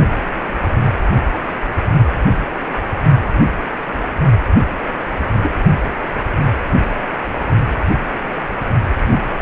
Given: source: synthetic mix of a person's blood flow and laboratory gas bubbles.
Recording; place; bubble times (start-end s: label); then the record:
Doppler ultrasound of blood flow; precordium
5.42-5.51 s: bubbles
9.09-9.22 s: bubbles
From the record:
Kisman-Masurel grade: 122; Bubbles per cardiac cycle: 1 to 2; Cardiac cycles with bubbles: 10 to 50%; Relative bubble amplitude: moderate (0.250 to 0.450); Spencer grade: 2 (many but less than half of the cardiac periods contain bubble signals, singularly or in groups); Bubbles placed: only in the low amplitude regions of the cardiac cycle